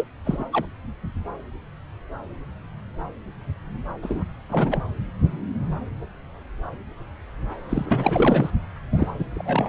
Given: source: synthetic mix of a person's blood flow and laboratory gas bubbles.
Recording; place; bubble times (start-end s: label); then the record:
Doppler ultrasound of blood flow; subclavian vein
0.00-0.08 s: bubbles
0.25-0.45 s: bubbles
0.53-0.67 s: bubbles
4.02-4.23 s: bubbles
4.49-4.80 s: bubbles
7.69-8.50 s: bubbles
8.93-9.14 s: bubbles
9.19-9.24 s: bubbles
9.35-9.68 s: bubbles
From the record:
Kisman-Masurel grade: 232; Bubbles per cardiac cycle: several, 3 to 8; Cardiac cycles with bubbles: 50 to 99%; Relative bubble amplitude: moderate (0.250 to 0.450); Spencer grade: 3 (all of the cardiac periods contain showers or single bubble signals, but not dominating or overriding the cardiac motion signals); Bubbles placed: anywhere in the cardiac cycle